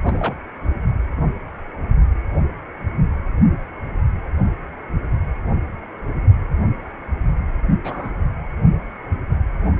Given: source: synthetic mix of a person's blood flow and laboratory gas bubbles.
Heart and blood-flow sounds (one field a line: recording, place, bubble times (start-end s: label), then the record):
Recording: Doppler ultrasound of blood flow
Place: precordium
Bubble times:
0.03-0.36 s: bubbles
7.84-8.12 s: bubbles
From the record:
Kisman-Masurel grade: 122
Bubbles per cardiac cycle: 1 to 2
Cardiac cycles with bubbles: 10 to 50%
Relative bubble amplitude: moderate (0.250 to 0.450)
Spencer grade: 2 (many but less than half of the cardiac periods contain bubble signals, singularly or in groups)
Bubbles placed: only in the low amplitude regions of the cardiac cycle